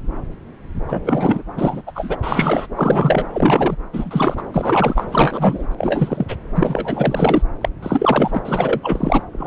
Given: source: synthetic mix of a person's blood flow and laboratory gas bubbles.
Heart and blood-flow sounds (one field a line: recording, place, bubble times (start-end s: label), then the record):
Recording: Doppler ultrasound of blood flow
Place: subclavian vein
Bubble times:
0.88-1.43 s: bubbles
1.56-1.82 s: bubbles
1.86-1.92 s: bubbles
1.95-2.17 s: bubbles
2.23-2.67 s: bubbles
2.76-3.25 s: bubbles
3.33-3.77 s: bubbles
3.93-4.42 s: bubbles
4.52-5.06 s: bubbles
5.12-5.67 s: bubbles
5.77-6.25 s: bubbles
6.28-6.36 s: bubbles
6.56-7.42 s: bubbles
7.61-7.69 s: bubbles
7.83-8.42 s: bubbles
8.45-8.80 s: bubbles
8.82-9.22 s: bubbles
9.32-9.47 s: bubbles
From the record:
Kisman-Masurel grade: 333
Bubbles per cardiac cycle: rolling drumbeat, 9 or more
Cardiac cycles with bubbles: 50 to 99%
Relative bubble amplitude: loud (0.450 to 0.775)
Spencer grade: 3 (all of the cardiac periods contain showers or single bubble signals, but not dominating or overriding the cardiac motion signals)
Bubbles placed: anywhere in the cardiac cycle